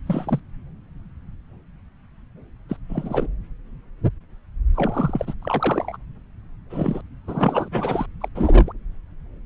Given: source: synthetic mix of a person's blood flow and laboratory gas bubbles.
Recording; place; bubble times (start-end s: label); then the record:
Doppler ultrasound of blood flow; subclavian vein
0.06-0.39 s: bubbles
2.69-2.76 s: bubbles
2.89-3.27 s: bubbles
4.74-5.34 s: bubbles
5.42-5.96 s: bubbles
6.70-7.01 s: bubbles
7.27-7.69 s: bubbles
7.71-8.06 s: bubbles
8.21-8.29 s: bubbles
8.35-8.72 s: bubbles
From the record:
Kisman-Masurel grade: 222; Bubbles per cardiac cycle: several, 3 to 8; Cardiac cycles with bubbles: 10 to 50%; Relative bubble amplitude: moderate (0.250 to 0.450); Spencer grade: 2 (many but less than half of the cardiac periods contain bubble signals, singularly or in groups); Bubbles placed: anywhere in the cardiac cycle